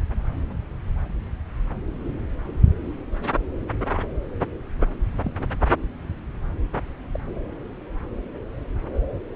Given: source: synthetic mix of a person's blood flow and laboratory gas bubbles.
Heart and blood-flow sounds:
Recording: Doppler ultrasound of blood flow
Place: subclavian vein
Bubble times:
5.24-5.46 s: bubbles
7.14-7.20 s: bubbles
From the record:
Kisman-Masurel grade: 121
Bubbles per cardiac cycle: 1 to 2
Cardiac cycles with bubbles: 10 to 50%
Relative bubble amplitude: barely perceptible (0.100 to 0.250)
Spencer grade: 2 (many but less than half of the cardiac periods contain bubble signals, singularly or in groups)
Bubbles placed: anywhere in the cardiac cycle

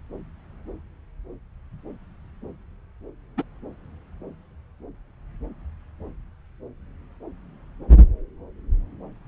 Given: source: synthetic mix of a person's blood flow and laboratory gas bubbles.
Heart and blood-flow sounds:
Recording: Doppler ultrasound of blood flow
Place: subclavian vein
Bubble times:
3.37-3.43 s: bubbles
From the record:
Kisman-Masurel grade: 112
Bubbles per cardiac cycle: 1 to 2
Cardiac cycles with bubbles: 1 to 10%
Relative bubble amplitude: moderate (0.250 to 0.450)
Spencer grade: 1 (occasional bubble signal discernible with the cardiac motion signal, with majority of cardiac periods free of bubbles)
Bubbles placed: anywhere in the cardiac cycle

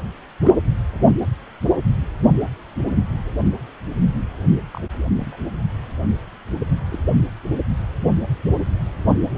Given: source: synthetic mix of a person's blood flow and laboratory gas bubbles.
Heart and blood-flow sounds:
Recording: Doppler ultrasound of blood flow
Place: precordium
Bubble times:
0.43-0.55 s: bubbles
4.72-4.81 s: bubbles
5.17-5.50 s: bubbles
6.90-7.05 s: bubbles
From the record:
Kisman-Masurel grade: 121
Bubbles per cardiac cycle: 1 to 2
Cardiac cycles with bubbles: 10 to 50%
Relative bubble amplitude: barely perceptible (0.100 to 0.250)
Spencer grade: 2 (many but less than half of the cardiac periods contain bubble signals, singularly or in groups)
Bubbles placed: only in the low amplitude regions of the cardiac cycle

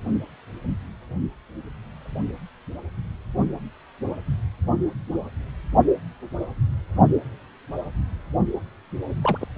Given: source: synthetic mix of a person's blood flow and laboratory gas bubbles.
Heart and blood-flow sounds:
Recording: Doppler ultrasound of blood flow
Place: precordium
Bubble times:
9.22-9.38 s: bubbles
9.40-9.47 s: bubbles
From the record:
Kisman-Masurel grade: 122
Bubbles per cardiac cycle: 1 to 2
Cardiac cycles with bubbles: 10 to 50%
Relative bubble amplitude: moderate (0.250 to 0.450)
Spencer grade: 2 (many but less than half of the cardiac periods contain bubble signals, singularly or in groups)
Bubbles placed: only in the low amplitude regions of the cardiac cycle

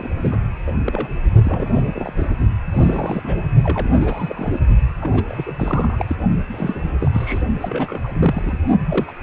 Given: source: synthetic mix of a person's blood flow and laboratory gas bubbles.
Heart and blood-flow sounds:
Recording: Doppler ultrasound of blood flow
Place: precordium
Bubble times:
0.00-0.11 s: bubbles
0.22-0.37 s: bubbles
0.67-0.73 s: bubbles
0.84-1.08 s: bubbles
1.44-2.13 s: bubbles
2.17-2.31 s: bubbles
2.72-3.46 s: bubbles
3.63-4.59 s: bubbles
5.01-5.24 s: bubbles
5.27-6.16 s: bubbles
6.50-6.80 s: bubbles
6.99-7.43 s: bubbles
7.60-8.00 s: bubbles
8.03-8.58 s: bubbles
8.89-9.12 s: bubbles
9.21-9.23 s: bubbles
From the record:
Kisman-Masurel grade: 342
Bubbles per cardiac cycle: rolling drumbeat, 9 or more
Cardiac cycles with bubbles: 100%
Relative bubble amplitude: moderate (0.250 to 0.450)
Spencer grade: 3 (all of the cardiac periods contain showers or single bubble signals, but not dominating or overriding the cardiac motion signals)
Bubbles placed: only in the low amplitude regions of the cardiac cycle

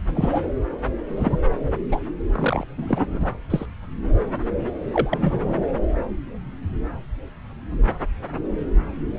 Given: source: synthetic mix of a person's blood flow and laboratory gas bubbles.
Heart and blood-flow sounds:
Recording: Doppler ultrasound of blood flow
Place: subclavian vein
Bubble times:
0.14-0.42 s: bubbles
1.08-1.38 s: bubbles
1.91-2.01 s: bubbles
2.32-2.67 s: bubbles
2.76-3.30 s: bubbles
3.50-3.66 s: bubbles
4.91-5.67 s: bubbles
From the record:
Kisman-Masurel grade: 222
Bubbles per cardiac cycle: several, 3 to 8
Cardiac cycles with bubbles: 10 to 50%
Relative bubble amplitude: moderate (0.250 to 0.450)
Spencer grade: 2 (many but less than half of the cardiac periods contain bubble signals, singularly or in groups)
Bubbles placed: anywhere in the cardiac cycle

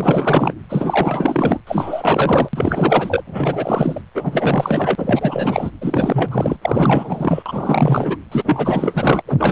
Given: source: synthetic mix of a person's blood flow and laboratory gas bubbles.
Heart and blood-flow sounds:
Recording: Doppler ultrasound of blood flow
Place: precordium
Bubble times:
0.00-0.53 s: bubbles
0.69-1.60 s: bubbles
1.67-2.48 s: bubbles
2.53-3.23 s: bubbles
3.26-4.01 s: bubbles
4.14-5.71 s: bubbles
5.81-6.56 s: bubbles
6.62-7.43 s: bubbles
7.46-8.17 s: bubbles
8.31-9.22 s: bubbles
9.27-9.52 s: bubbles
From the record:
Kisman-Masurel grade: 444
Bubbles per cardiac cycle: continuous sound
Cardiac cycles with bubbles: 100%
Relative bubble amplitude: maximal (0.775 to 0.999)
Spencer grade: 4 (maximum detectable bubble signal sounding continuously throughout systole and diastole of every cardiac period, and overriding the amplitude of the normal cardiac signals)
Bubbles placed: anywhere in the cardiac cycle

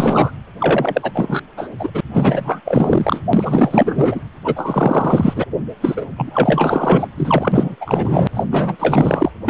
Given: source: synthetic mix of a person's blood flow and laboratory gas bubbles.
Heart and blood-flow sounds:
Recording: Doppler ultrasound of blood flow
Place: precordium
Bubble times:
0.00-0.32 s: bubbles
0.59-1.12 s: bubbles
1.14-1.42 s: bubbles
1.57-1.69 s: bubbles
1.79-1.90 s: bubbles
1.94-2.00 s: bubbles
2.13-2.60 s: bubbles
2.65-3.20 s: bubbles
3.33-4.20 s: bubbles
4.44-5.45 s: bubbles
5.81-6.08 s: bubbles
6.17-7.07 s: bubbles
7.17-7.75 s: bubbles
7.80-8.28 s: bubbles
8.35-8.46 s: bubbles
8.51-8.77 s: bubbles
8.79-9.32 s: bubbles
9.46-9.50 s: bubbles
From the record:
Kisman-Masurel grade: 444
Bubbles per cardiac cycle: continuous sound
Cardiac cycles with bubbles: 100%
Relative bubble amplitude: maximal (0.775 to 0.999)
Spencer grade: 4 (maximum detectable bubble signal sounding continuously throughout systole and diastole of every cardiac period, and overriding the amplitude of the normal cardiac signals)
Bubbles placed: anywhere in the cardiac cycle

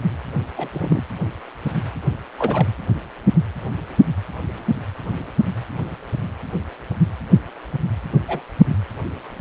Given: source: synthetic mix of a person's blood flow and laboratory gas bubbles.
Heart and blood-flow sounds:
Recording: Doppler ultrasound of blood flow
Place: precordium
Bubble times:
0.56-0.69 s: bubbles
0.74-1.01 s: bubbles
2.38-2.67 s: bubbles
8.12-8.20 s: bubbles
8.28-8.45 s: bubbles
From the record:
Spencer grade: 2 (many but less than half of the cardiac periods contain bubble signals, singularly or in groups)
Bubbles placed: anywhere in the cardiac cycle

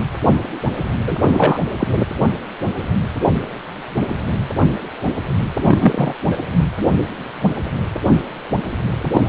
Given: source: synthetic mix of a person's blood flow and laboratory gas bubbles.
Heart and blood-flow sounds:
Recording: Doppler ultrasound of blood flow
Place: precordium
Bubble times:
0.00-0.04 s: bubbles
1.07-1.18 s: bubbles
1.21-1.59 s: bubbles
1.77-1.88 s: bubbles
5.56-6.14 s: bubbles
6.31-6.36 s: bubbles
9.13-9.29 s: bubbles
From the record:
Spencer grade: 3 (all of the cardiac periods contain showers or single bubble signals, but not dominating or overriding the cardiac motion signals)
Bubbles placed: anywhere in the cardiac cycle

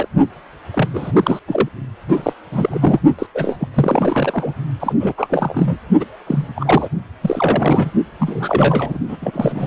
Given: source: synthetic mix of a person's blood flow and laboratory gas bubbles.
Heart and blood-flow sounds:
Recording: Doppler ultrasound of blood flow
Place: precordium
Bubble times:
0.00-0.08 s: bubbles
0.73-0.89 s: bubbles
0.94-1.39 s: bubbles
1.47-1.69 s: bubbles
2.08-2.33 s: bubbles
2.52-3.00 s: bubbles
3.19-3.27 s: bubbles
3.35-3.69 s: bubbles
3.74-4.53 s: bubbles
4.79-4.93 s: bubbles
5.00-5.13 s: bubbles
5.17-5.77 s: bubbles
6.00-6.04 s: bubbles
6.26-6.49 s: bubbles
6.55-6.88 s: bubbles
7.21-7.92 s: bubbles
8.19-8.97 s: bubbles
9.08-9.17 s: bubbles
9.21-9.67 s: bubbles
From the record:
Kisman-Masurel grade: 343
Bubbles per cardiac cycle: rolling drumbeat, 9 or more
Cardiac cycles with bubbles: 100%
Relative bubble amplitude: loud (0.450 to 0.775)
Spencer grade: 3 (all of the cardiac periods contain showers or single bubble signals, but not dominating or overriding the cardiac motion signals)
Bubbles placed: only in the low amplitude regions of the cardiac cycle

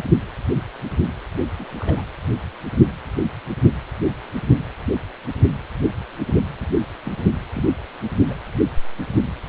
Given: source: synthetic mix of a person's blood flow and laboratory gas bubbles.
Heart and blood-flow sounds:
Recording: Doppler ultrasound of blood flow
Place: precordium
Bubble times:
1.54-1.65 s: bubbles
1.79-2.02 s: bubbles
7.05-7.11 s: bubbles
7.55-7.64 s: bubbles
8.26-8.33 s: bubbles
From the record:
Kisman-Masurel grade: 121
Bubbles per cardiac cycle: 1 to 2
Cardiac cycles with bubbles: 10 to 50%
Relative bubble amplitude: barely perceptible (0.100 to 0.250)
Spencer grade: 2 (many but less than half of the cardiac periods contain bubble signals, singularly or in groups)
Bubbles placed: anywhere in the cardiac cycle

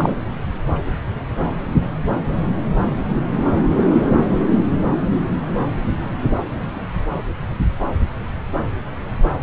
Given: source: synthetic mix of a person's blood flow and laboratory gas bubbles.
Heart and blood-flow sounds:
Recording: Doppler ultrasound of blood flow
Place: subclavian vein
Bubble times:
0.00-0.15 s: bubbles
From the record:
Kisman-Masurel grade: 212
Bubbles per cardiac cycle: several, 3 to 8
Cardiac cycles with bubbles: 1 to 10%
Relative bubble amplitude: moderate (0.250 to 0.450)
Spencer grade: 1 (occasional bubble signal discernible with the cardiac motion signal, with majority of cardiac periods free of bubbles)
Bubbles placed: anywhere in the cardiac cycle

